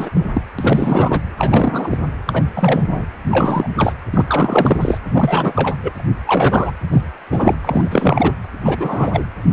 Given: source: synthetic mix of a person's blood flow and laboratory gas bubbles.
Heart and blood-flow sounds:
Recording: Doppler ultrasound of blood flow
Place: precordium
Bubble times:
0.00-0.09 s: bubbles
0.15-0.23 s: bubbles
0.34-0.42 s: bubbles
0.58-1.21 s: bubbles
1.37-1.98 s: bubbles
2.27-2.50 s: bubbles
2.56-3.06 s: bubbles
3.31-3.68 s: bubbles
3.77-3.93 s: bubbles
4.11-4.98 s: bubbles
5.13-5.76 s: bubbles
5.83-5.94 s: bubbles
5.99-6.04 s: bubbles
6.26-6.71 s: bubbles
6.90-7.02 s: bubbles
7.29-7.55 s: bubbles
7.64-8.34 s: bubbles
8.64-9.24 s: bubbles
From the record:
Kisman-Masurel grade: 343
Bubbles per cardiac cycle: rolling drumbeat, 9 or more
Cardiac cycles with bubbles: 100%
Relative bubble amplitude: loud (0.450 to 0.775)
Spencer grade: 3 (all of the cardiac periods contain showers or single bubble signals, but not dominating or overriding the cardiac motion signals)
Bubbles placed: anywhere in the cardiac cycle

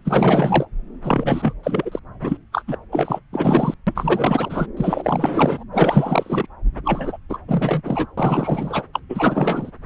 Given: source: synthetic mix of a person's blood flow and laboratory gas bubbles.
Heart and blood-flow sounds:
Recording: Doppler ultrasound of blood flow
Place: subclavian vein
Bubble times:
0.04-0.66 s: bubbles
1.04-1.53 s: bubbles
1.63-1.99 s: bubbles
2.21-2.38 s: bubbles
2.52-2.65 s: bubbles
2.67-2.77 s: bubbles
2.92-3.21 s: bubbles
3.33-3.74 s: bubbles
3.87-4.67 s: bubbles
4.77-5.63 s: bubbles
5.71-6.46 s: bubbles
6.84-7.18 s: bubbles
7.29-7.38 s: bubbles
7.48-7.82 s: bubbles
7.84-8.07 s: bubbles
8.17-8.83 s: bubbles
8.93-9.00 s: bubbles
9.09-9.71 s: bubbles
From the record:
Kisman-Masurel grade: 444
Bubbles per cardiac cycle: continuous sound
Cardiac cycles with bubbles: 100%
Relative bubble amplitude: maximal (0.775 to 0.999)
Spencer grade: 4 (maximum detectable bubble signal sounding continuously throughout systole and diastole of every cardiac period, and overriding the amplitude of the normal cardiac signals)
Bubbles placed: anywhere in the cardiac cycle

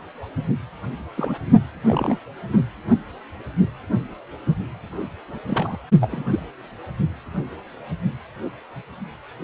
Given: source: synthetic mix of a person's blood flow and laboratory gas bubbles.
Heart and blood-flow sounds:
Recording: Doppler ultrasound of blood flow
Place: precordium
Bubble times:
1.17-1.35 s: bubbles
1.84-2.19 s: bubbles
2.52-2.58 s: bubbles
5.29-5.39 s: bubbles
5.48-5.78 s: bubbles
6.01-6.24 s: bubbles
6.30-6.40 s: bubbles
From the record:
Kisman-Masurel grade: 222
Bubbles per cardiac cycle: several, 3 to 8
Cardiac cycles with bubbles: 10 to 50%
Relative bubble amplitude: moderate (0.250 to 0.450)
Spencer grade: 2 (many but less than half of the cardiac periods contain bubble signals, singularly or in groups)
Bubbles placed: anywhere in the cardiac cycle

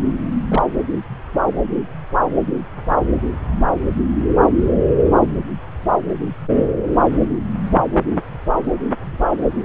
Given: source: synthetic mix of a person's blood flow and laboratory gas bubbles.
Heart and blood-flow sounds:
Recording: Doppler ultrasound of blood flow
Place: subclavian vein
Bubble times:
0.48-0.62 s: bubbles
From the record:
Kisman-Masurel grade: 112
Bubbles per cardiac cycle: 1 to 2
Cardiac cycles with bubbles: 1 to 10%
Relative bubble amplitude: moderate (0.250 to 0.450)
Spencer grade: 1 (occasional bubble signal discernible with the cardiac motion signal, with majority of cardiac periods free of bubbles)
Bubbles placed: anywhere in the cardiac cycle

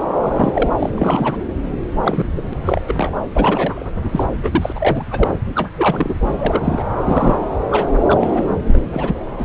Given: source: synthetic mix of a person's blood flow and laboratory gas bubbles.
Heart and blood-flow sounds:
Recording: Doppler ultrasound of blood flow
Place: subclavian vein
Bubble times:
0.20-0.69 s: bubbles
0.79-0.89 s: bubbles
0.97-1.36 s: bubbles
2.04-2.30 s: bubbles
2.36-2.45 s: bubbles
2.50-2.54 s: bubbles
2.65-2.81 s: bubbles
2.87-3.12 s: bubbles
3.33-3.87 s: bubbles
4.04-4.09 s: bubbles
4.12-4.24 s: bubbles
4.43-4.72 s: bubbles
4.75-5.04 s: bubbles
5.11-5.28 s: bubbles
5.55-5.70 s: bubbles
5.76-6.17 s: bubbles
6.21-6.30 s: bubbles
6.39-6.88 s: bubbles
7.04-7.38 s: bubbles
7.71-7.88 s: bubbles
8.07-8.57 s: bubbles
8.65-9.21 s: bubbles
9.38-9.45 s: bubbles
From the record:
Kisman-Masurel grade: 242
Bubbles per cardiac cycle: several, 3 to 8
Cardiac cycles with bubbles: 100%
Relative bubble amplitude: moderate (0.250 to 0.450)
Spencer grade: 3 (all of the cardiac periods contain showers or single bubble signals, but not dominating or overriding the cardiac motion signals)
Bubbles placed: anywhere in the cardiac cycle

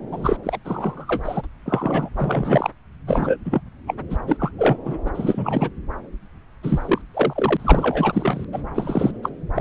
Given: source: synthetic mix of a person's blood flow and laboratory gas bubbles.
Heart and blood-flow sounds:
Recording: Doppler ultrasound of blood flow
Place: subclavian vein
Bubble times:
0.11-0.37 s: bubbles
0.43-0.58 s: bubbles
0.65-1.47 s: bubbles
1.66-2.09 s: bubbles
2.17-2.70 s: bubbles
3.07-3.37 s: bubbles
3.44-3.60 s: bubbles
3.87-3.94 s: bubbles
4.09-4.17 s: bubbles
4.26-4.51 s: bubbles
4.58-4.76 s: bubbles
4.85-4.98 s: bubbles
5.05-5.10 s: bubbles
5.14-5.69 s: bubbles
6.62-7.01 s: bubbles
7.13-8.45 s: bubbles
8.53-8.62 s: bubbles
8.75-9.18 s: bubbles
9.23-9.29 s: bubbles
9.54-9.61 s: bubbles
From the record:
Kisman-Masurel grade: 342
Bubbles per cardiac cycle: rolling drumbeat, 9 or more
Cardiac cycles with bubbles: 100%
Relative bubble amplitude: moderate (0.250 to 0.450)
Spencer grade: 3 (all of the cardiac periods contain showers or single bubble signals, but not dominating or overriding the cardiac motion signals)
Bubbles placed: anywhere in the cardiac cycle

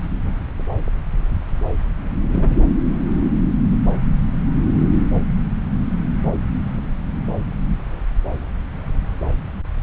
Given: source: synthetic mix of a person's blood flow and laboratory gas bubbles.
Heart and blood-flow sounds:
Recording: Doppler ultrasound of blood flow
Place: subclavian vein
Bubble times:
2.31-2.55 s: bubbles
From the record:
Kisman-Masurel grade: 112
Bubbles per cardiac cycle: 1 to 2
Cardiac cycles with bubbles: 1 to 10%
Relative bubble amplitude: moderate (0.250 to 0.450)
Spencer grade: 1 (occasional bubble signal discernible with the cardiac motion signal, with majority of cardiac periods free of bubbles)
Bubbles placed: anywhere in the cardiac cycle

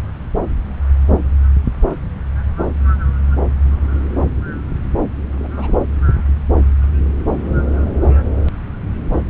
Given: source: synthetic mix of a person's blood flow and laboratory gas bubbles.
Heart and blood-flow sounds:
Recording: Doppler ultrasound of blood flow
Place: subclavian vein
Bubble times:
5.38-5.75 s: bubbles
From the record:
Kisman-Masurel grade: 211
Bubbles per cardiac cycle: several, 3 to 8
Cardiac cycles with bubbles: 1 to 10%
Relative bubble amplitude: barely perceptible (0.100 to 0.250)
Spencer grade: 1 (occasional bubble signal discernible with the cardiac motion signal, with majority of cardiac periods free of bubbles)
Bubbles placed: anywhere in the cardiac cycle

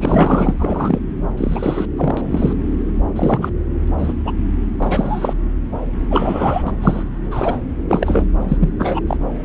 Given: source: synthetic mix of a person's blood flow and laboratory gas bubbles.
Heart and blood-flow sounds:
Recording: Doppler ultrasound of blood flow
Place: subclavian vein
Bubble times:
0.00-0.54 s: bubbles
0.59-0.99 s: bubbles
1.37-1.85 s: bubbles
1.96-2.21 s: bubbles
2.27-2.53 s: bubbles
3.16-3.50 s: bubbles
3.98-4.13 s: bubbles
4.25-4.32 s: bubbles
4.79-5.33 s: bubbles
6.10-6.63 s: bubbles
6.67-6.72 s: bubbles
6.82-7.03 s: bubbles
7.30-7.58 s: bubbles
7.88-8.24 s: bubbles
8.48-8.57 s: bubbles
8.61-8.71 s: bubbles
8.79-9.00 s: bubbles
9.07-9.17 s: bubbles
From the record:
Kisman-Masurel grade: 233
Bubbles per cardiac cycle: several, 3 to 8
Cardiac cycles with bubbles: 50 to 99%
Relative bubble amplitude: loud (0.450 to 0.775)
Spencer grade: 3 (all of the cardiac periods contain showers or single bubble signals, but not dominating or overriding the cardiac motion signals)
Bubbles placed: anywhere in the cardiac cycle

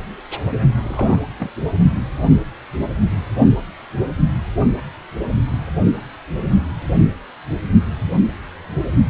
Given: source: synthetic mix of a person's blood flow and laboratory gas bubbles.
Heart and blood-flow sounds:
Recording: Doppler ultrasound of blood flow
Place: precordium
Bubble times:
0.84-1.22 s: bubbles
1.39-1.50 s: bubbles
From the record:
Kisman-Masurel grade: 122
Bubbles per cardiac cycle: 1 to 2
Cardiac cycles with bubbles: 10 to 50%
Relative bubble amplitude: moderate (0.250 to 0.450)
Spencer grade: 2 (many but less than half of the cardiac periods contain bubble signals, singularly or in groups)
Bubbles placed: only in the low amplitude regions of the cardiac cycle

